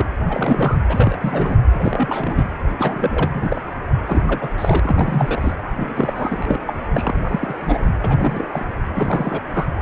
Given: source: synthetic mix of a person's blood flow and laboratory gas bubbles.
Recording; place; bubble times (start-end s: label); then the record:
Doppler ultrasound of blood flow; precordium
0.00-0.05 s: bubbles
0.29-0.77 s: bubbles
0.88-1.58 s: bubbles
1.73-2.52 s: bubbles
2.78-3.60 s: bubbles
4.05-4.49 s: bubbles
4.58-4.79 s: bubbles
4.83-5.52 s: bubbles
5.75-6.58 s: bubbles
6.65-6.73 s: bubbles
6.93-7.87 s: bubbles
8.04-8.48 s: bubbles
8.51-8.65 s: bubbles
8.94-9.41 s: bubbles
9.48-9.82 s: bubbles
From the record:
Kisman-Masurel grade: 342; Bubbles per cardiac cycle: rolling drumbeat, 9 or more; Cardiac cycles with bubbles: 100%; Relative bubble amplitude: moderate (0.250 to 0.450); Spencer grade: 3 (all of the cardiac periods contain showers or single bubble signals, but not dominating or overriding the cardiac motion signals); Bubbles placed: anywhere in the cardiac cycle